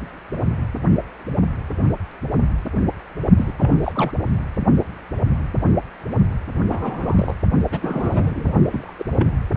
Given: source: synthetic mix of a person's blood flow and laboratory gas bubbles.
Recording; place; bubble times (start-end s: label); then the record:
Doppler ultrasound of blood flow; precordium
3.37-3.54 s: bubbles
3.57-3.71 s: bubbles
3.83-4.11 s: bubbles
6.69-7.35 s: bubbles
7.72-8.52 s: bubbles
8.71-8.93 s: bubbles
8.97-9.04 s: bubbles
9.18-9.27 s: bubbles
From the record:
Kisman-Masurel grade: 222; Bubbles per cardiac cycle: several, 3 to 8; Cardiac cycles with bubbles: 10 to 50%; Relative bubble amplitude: moderate (0.250 to 0.450); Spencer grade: 2 (many but less than half of the cardiac periods contain bubble signals, singularly or in groups); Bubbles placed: only in the low amplitude regions of the cardiac cycle